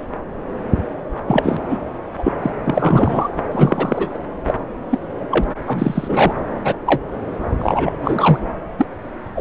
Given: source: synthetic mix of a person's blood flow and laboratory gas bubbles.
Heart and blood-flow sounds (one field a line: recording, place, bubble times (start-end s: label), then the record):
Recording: Doppler ultrasound of blood flow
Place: subclavian vein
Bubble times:
1.27-1.57 s: bubbles
1.70-1.78 s: bubbles
2.18-2.33 s: bubbles
2.42-2.50 s: bubbles
2.66-3.29 s: bubbles
3.52-4.17 s: bubbles
4.46-4.54 s: bubbles
4.91-5.00 s: bubbles
5.31-5.44 s: bubbles
5.67-6.33 s: bubbles
6.64-6.75 s: bubbles
6.86-7.03 s: bubbles
7.59-8.40 s: bubbles
8.78-8.86 s: bubbles
9.35-9.41 s: bubbles
From the record:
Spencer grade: 3 (all of the cardiac periods contain showers or single bubble signals, but not dominating or overriding the cardiac motion signals)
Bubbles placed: anywhere in the cardiac cycle